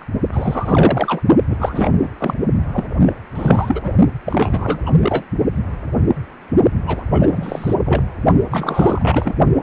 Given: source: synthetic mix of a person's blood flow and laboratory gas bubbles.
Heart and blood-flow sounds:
Doppler ultrasound of blood flow; precordium
0.00-0.04 s: bubbles
0.33-1.22 s: bubbles
1.49-1.90 s: bubbles
2.01-2.08 s: bubbles
2.18-2.34 s: bubbles
2.72-2.84 s: bubbles
3.06-3.13 s: bubbles
3.35-3.92 s: bubbles
4.25-4.79 s: bubbles
4.86-4.91 s: bubbles
4.98-5.25 s: bubbles
6.86-7.03 s: bubbles
7.11-7.78 s: bubbles
7.86-8.03 s: bubbles
8.51-9.36 s: bubbles
From the record:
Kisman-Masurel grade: 333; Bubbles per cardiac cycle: rolling drumbeat, 9 or more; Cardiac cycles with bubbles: 50 to 99%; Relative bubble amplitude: loud (0.450 to 0.775); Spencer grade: 3 (all of the cardiac periods contain showers or single bubble signals, but not dominating or overriding the cardiac motion signals); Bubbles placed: only in the low amplitude regions of the cardiac cycle

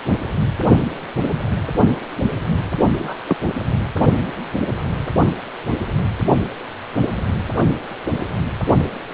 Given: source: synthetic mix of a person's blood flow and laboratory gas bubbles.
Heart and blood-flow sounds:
Doppler ultrasound of blood flow; precordium
2.98-3.21 s: bubbles
3.27-3.37 s: bubbles
From the record:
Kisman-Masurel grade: 112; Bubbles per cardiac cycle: 1 to 2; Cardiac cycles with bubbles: 1 to 10%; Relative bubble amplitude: moderate (0.250 to 0.450); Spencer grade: 1 (occasional bubble signal discernible with the cardiac motion signal, with majority of cardiac periods free of bubbles); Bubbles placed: only in the low amplitude regions of the cardiac cycle

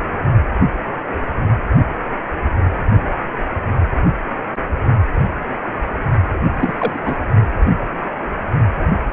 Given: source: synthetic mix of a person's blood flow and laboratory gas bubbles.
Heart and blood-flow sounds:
Doppler ultrasound of blood flow; precordium
6.56-6.73 s: bubbles
6.78-7.00 s: bubbles
7.04-7.15 s: bubbles
From the record:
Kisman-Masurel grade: 213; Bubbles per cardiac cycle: several, 3 to 8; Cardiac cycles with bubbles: 1 to 10%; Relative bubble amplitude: loud (0.450 to 0.775); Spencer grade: 1 (occasional bubble signal discernible with the cardiac motion signal, with majority of cardiac periods free of bubbles); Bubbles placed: only in the low amplitude regions of the cardiac cycle

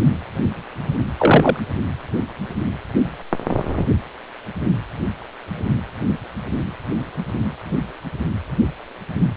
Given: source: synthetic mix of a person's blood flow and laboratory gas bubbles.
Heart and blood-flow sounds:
Doppler ultrasound of blood flow; precordium
0.00-0.03 s: bubbles
1.18-1.61 s: bubbles
From the record:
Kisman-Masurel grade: 123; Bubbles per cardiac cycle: 1 to 2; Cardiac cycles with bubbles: 10 to 50%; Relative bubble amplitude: loud (0.450 to 0.775); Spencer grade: 2 (many but less than half of the cardiac periods contain bubble signals, singularly or in groups); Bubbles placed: anywhere in the cardiac cycle

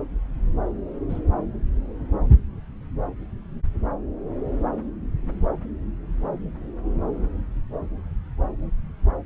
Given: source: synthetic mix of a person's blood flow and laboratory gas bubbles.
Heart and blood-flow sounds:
Doppler ultrasound of blood flow; subclavian vein
1.09-1.20 s: bubbles
From the record:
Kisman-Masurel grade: 111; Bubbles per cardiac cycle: 1 to 2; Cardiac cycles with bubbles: 1 to 10%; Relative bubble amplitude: barely perceptible (0.100 to 0.250); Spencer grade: 1 (occasional bubble signal discernible with the cardiac motion signal, with majority of cardiac periods free of bubbles); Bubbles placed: anywhere in the cardiac cycle

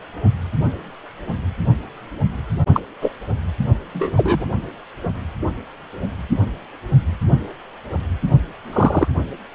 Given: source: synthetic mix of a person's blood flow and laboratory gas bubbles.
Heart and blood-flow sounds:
Doppler ultrasound of blood flow; precordium
2.73-2.80 s: bubbles
3.02-3.11 s: bubbles
3.94-4.10 s: bubbles
4.16-4.46 s: bubbles
8.72-9.08 s: bubbles
From the record:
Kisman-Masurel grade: 123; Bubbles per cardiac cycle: 1 to 2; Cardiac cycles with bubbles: 10 to 50%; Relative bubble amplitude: loud (0.450 to 0.775); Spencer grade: 2 (many but less than half of the cardiac periods contain bubble signals, singularly or in groups); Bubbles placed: anywhere in the cardiac cycle

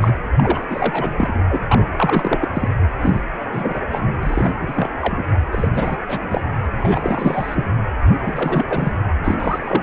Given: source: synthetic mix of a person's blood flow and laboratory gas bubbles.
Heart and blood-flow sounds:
Doppler ultrasound of blood flow; precordium
0.00-0.12 s: bubbles
0.36-0.66 s: bubbles
0.71-1.43 s: bubbles
1.49-1.61 s: bubbles
1.68-1.87 s: bubbles
1.97-2.48 s: bubbles
2.53-2.68 s: bubbles
3.02-3.22 s: bubbles
3.52-3.81 s: bubbles
3.90-4.19 s: bubbles
4.23-4.52 s: bubbles
4.60-4.89 s: bubbles
5.01-5.25 s: bubbles
5.51-5.68 s: bubbles
5.74-5.96 s: bubbles
6.07-6.41 s: bubbles
6.64-6.66 s: bubbles
6.79-7.71 s: bubbles
8.08-8.16 s: bubbles
8.22-8.66 s: bubbles
8.70-8.92 s: bubbles
9.24-9.34 s: bubbles
9.39-9.83 s: bubbles
From the record:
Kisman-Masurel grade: 342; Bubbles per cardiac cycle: rolling drumbeat, 9 or more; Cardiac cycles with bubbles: 100%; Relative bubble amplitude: moderate (0.250 to 0.450); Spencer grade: 3 (all of the cardiac periods contain showers or single bubble signals, but not dominating or overriding the cardiac motion signals); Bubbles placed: anywhere in the cardiac cycle

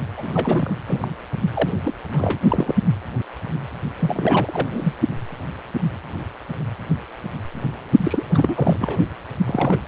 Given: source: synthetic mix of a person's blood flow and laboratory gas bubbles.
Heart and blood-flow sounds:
Doppler ultrasound of blood flow; precordium
0.16-0.76 s: bubbles
0.86-1.08 s: bubbles
1.53-1.73 s: bubbles
1.84-1.94 s: bubbles
2.12-2.39 s: bubbles
2.48-2.75 s: bubbles
3.99-4.92 s: bubbles
7.96-8.23 s: bubbles
8.34-8.98 s: bubbles
9.46-9.77 s: bubbles
From the record:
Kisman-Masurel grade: 332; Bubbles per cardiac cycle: rolling drumbeat, 9 or more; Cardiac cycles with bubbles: 50 to 99%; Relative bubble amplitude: moderate (0.250 to 0.450); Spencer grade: 3 (all of the cardiac periods contain showers or single bubble signals, but not dominating or overriding the cardiac motion signals); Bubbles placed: only in the low amplitude regions of the cardiac cycle

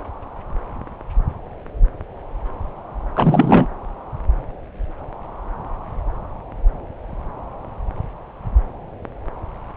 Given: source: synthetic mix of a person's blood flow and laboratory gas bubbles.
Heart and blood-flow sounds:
Doppler ultrasound of blood flow; subclavian vein
3.15-3.66 s: bubbles
From the record:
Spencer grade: 1 (occasional bubble signal discernible with the cardiac motion signal, with majority of cardiac periods free of bubbles); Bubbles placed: anywhere in the cardiac cycle

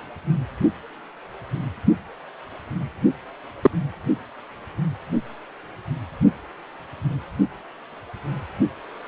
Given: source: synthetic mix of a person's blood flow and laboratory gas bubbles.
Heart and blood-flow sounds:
Doppler ultrasound of blood flow; precordium
3.62-3.71 s: bubbles
From the record:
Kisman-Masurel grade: 113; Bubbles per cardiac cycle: 1 to 2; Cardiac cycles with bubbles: 1 to 10%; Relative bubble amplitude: loud (0.450 to 0.775); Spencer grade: 1 (occasional bubble signal discernible with the cardiac motion signal, with majority of cardiac periods free of bubbles); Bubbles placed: only in the low amplitude regions of the cardiac cycle

